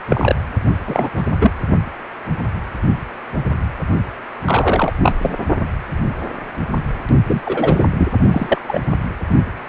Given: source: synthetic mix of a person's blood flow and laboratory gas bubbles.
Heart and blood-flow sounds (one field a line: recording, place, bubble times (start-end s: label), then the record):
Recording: Doppler ultrasound of blood flow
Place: precordium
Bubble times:
0.09-0.35 s: bubbles
0.87-1.09 s: bubbles
1.17-1.23 s: bubbles
1.41-1.51 s: bubbles
4.46-4.92 s: bubbles
5.02-5.14 s: bubbles
5.22-5.35 s: bubbles
7.27-7.41 s: bubbles
7.44-7.85 s: bubbles
7.98-8.09 s: bubbles
8.31-8.58 s: bubbles
8.67-8.80 s: bubbles
From the record:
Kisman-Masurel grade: 233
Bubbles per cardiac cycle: several, 3 to 8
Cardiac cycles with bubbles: 50 to 99%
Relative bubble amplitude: loud (0.450 to 0.775)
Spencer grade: 3 (all of the cardiac periods contain showers or single bubble signals, but not dominating or overriding the cardiac motion signals)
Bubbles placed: only in the low amplitude regions of the cardiac cycle